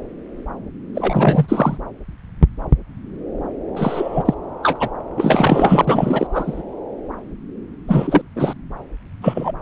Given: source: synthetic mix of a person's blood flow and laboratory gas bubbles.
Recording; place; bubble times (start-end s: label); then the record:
Doppler ultrasound of blood flow; subclavian vein
0.95-1.77 s: bubbles
3.76-4.34 s: bubbles
4.63-4.88 s: bubbles
5.17-6.27 s: bubbles
6.32-6.62 s: bubbles
7.88-8.21 s: bubbles
8.36-8.54 s: bubbles
9.21-9.52 s: bubbles
From the record:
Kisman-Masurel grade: 333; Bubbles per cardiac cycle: rolling drumbeat, 9 or more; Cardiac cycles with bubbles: 50 to 99%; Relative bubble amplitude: loud (0.450 to 0.775); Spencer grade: 3 (all of the cardiac periods contain showers or single bubble signals, but not dominating or overriding the cardiac motion signals); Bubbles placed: anywhere in the cardiac cycle